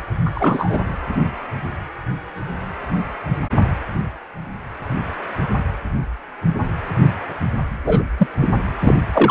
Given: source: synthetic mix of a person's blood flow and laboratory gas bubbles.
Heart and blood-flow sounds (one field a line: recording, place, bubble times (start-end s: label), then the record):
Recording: Doppler ultrasound of blood flow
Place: precordium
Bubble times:
0.25-0.78 s: bubbles
7.84-8.04 s: bubbles
8.17-8.27 s: bubbles
8.41-8.49 s: bubbles
8.79-8.95 s: bubbles
9.13-9.30 s: bubbles
From the record:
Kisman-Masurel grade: 223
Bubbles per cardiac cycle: several, 3 to 8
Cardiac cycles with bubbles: 10 to 50%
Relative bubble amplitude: loud (0.450 to 0.775)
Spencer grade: 2 (many but less than half of the cardiac periods contain bubble signals, singularly or in groups)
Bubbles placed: anywhere in the cardiac cycle